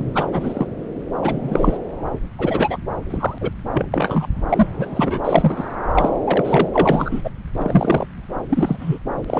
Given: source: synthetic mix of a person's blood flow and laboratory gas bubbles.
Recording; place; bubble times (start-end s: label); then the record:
Doppler ultrasound of blood flow; subclavian vein
0.00-0.11 s: bubbles
0.14-0.27 s: bubbles
0.32-0.67 s: bubbles
1.21-1.77 s: bubbles
2.38-2.78 s: bubbles
3.10-3.38 s: bubbles
3.41-3.51 s: bubbles
3.73-3.85 s: bubbles
3.91-4.27 s: bubbles
4.49-4.67 s: bubbles
4.72-5.20 s: bubbles
5.24-5.65 s: bubbles
5.92-6.09 s: bubbles
6.25-6.67 s: bubbles
6.73-7.21 s: bubbles
7.24-7.30 s: bubbles
7.59-8.06 s: bubbles
8.48-8.98 s: bubbles
9.21-9.24 s: bubbles
9.27-9.40 s: bubbles
From the record:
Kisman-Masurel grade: 243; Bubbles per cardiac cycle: several, 3 to 8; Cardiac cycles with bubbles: 100%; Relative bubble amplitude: loud (0.450 to 0.775); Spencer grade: 3 (all of the cardiac periods contain showers or single bubble signals, but not dominating or overriding the cardiac motion signals); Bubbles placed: anywhere in the cardiac cycle